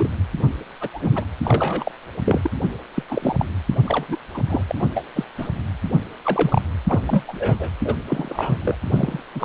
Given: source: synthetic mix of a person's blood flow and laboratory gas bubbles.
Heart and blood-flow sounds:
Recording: Doppler ultrasound of blood flow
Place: precordium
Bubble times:
0.00-0.09 s: bubbles
0.81-0.89 s: bubbles
0.93-1.25 s: bubbles
1.44-1.92 s: bubbles
2.24-2.50 s: bubbles
2.96-3.03 s: bubbles
3.08-3.36 s: bubbles
3.39-3.45 s: bubbles
3.85-4.16 s: bubbles
4.33-4.41 s: bubbles
4.48-4.62 s: bubbles
4.67-4.75 s: bubbles
4.79-4.88 s: bubbles
4.95-5.04 s: bubbles
5.16-5.25 s: bubbles
5.38-5.49 s: bubbles
6.25-6.62 s: bubbles
6.88-7.00 s: bubbles
7.05-7.25 s: bubbles
7.27-7.70 s: bubbles
7.84-7.95 s: bubbles
8.07-8.57 s: bubbles
8.62-8.76 s: bubbles
8.88-9.23 s: bubbles
9.34-9.44 s: bubbles
From the record:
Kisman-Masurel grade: 242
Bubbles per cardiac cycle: several, 3 to 8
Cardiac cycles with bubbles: 100%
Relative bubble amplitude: moderate (0.250 to 0.450)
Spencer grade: 3 (all of the cardiac periods contain showers or single bubble signals, but not dominating or overriding the cardiac motion signals)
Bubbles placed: anywhere in the cardiac cycle

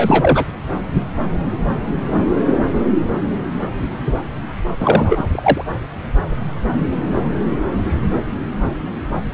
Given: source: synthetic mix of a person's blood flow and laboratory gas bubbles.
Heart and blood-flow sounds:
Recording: Doppler ultrasound of blood flow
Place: subclavian vein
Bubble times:
0.00-0.45 s: bubbles
4.80-5.24 s: bubbles
5.31-5.66 s: bubbles
From the record:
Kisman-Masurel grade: 223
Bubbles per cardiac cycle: several, 3 to 8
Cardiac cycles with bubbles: 10 to 50%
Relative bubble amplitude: loud (0.450 to 0.775)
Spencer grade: 2 (many but less than half of the cardiac periods contain bubble signals, singularly or in groups)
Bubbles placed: anywhere in the cardiac cycle

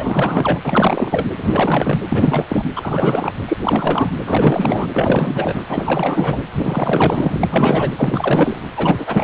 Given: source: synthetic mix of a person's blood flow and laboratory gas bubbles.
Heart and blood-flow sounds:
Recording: Doppler ultrasound of blood flow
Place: precordium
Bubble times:
0.00-1.28 s: bubbles
1.38-1.99 s: bubbles
2.08-2.65 s: bubbles
2.76-3.33 s: bubbles
3.48-3.57 s: bubbles
3.60-4.10 s: bubbles
4.25-4.88 s: bubbles
4.93-5.65 s: bubbles
5.68-6.38 s: bubbles
6.52-7.39 s: bubbles
7.43-7.94 s: bubbles
7.97-8.61 s: bubbles
8.76-9.24 s: bubbles
From the record:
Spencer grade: 4 (maximum detectable bubble signal sounding continuously throughout systole and diastole of every cardiac period, and overriding the amplitude of the normal cardiac signals)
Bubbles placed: anywhere in the cardiac cycle

